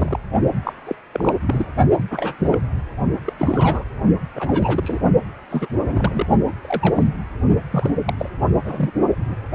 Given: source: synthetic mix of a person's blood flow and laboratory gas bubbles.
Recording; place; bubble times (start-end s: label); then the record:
Doppler ultrasound of blood flow; precordium
0.00-0.18 s: bubbles
0.64-0.72 s: bubbles
0.87-0.95 s: bubbles
1.12-1.33 s: bubbles
1.46-1.67 s: bubbles
1.98-2.03 s: bubbles
2.10-2.35 s: bubbles
2.39-2.64 s: bubbles
3.25-3.33 s: bubbles
3.38-3.83 s: bubbles
4.36-5.00 s: bubbles
5.50-5.67 s: bubbles
5.87-6.26 s: bubbles
6.47-6.51 s: bubbles
6.62-7.07 s: bubbles
7.71-7.91 s: bubbles
8.05-8.13 s: bubbles
8.18-8.29 s: bubbles
8.64-8.91 s: bubbles
9.16-9.34 s: bubbles
From the record:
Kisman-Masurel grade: 242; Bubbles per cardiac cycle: several, 3 to 8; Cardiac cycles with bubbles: 100%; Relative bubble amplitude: moderate (0.250 to 0.450); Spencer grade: 3 (all of the cardiac periods contain showers or single bubble signals, but not dominating or overriding the cardiac motion signals); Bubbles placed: only in the low amplitude regions of the cardiac cycle